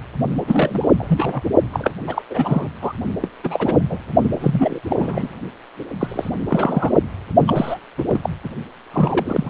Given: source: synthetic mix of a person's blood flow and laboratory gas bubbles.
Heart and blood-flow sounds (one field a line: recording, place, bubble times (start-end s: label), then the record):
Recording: Doppler ultrasound of blood flow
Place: precordium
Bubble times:
0.47-0.90 s: bubbles
0.97-1.42 s: bubbles
1.73-1.93 s: bubbles
2.07-2.22 s: bubbles
2.29-2.69 s: bubbles
2.81-2.92 s: bubbles
3.21-3.28 s: bubbles
3.44-3.84 s: bubbles
3.90-3.98 s: bubbles
4.21-4.80 s: bubbles
4.90-5.39 s: bubbles
5.79-5.84 s: bubbles
6.00-6.30 s: bubbles
6.49-6.92 s: bubbles
7.46-7.79 s: bubbles
7.98-8.04 s: bubbles
8.08-8.21 s: bubbles
8.23-8.29 s: bubbles
8.43-8.49 s: bubbles
8.92-9.49 s: bubbles
From the record:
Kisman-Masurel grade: 232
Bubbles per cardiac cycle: several, 3 to 8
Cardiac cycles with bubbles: 50 to 99%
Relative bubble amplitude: moderate (0.250 to 0.450)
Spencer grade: 3 (all of the cardiac periods contain showers or single bubble signals, but not dominating or overriding the cardiac motion signals)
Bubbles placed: only in the low amplitude regions of the cardiac cycle